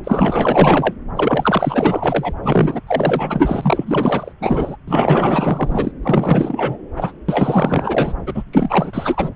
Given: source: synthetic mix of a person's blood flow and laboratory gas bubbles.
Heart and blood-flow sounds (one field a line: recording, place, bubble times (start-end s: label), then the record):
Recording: Doppler ultrasound of blood flow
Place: subclavian vein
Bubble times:
0.04-0.94 s: bubbles
1.16-2.33 s: bubbles
2.42-2.80 s: bubbles
2.87-4.33 s: bubbles
4.41-4.76 s: bubbles
4.87-5.92 s: bubbles
6.03-6.77 s: bubbles
6.96-7.12 s: bubbles
7.29-8.13 s: bubbles
8.26-8.43 s: bubbles
8.52-9.30 s: bubbles
From the record:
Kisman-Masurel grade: 444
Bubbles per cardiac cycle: continuous sound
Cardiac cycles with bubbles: 100%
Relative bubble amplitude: maximal (0.775 to 0.999)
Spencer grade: 4 (maximum detectable bubble signal sounding continuously throughout systole and diastole of every cardiac period, and overriding the amplitude of the normal cardiac signals)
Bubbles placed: anywhere in the cardiac cycle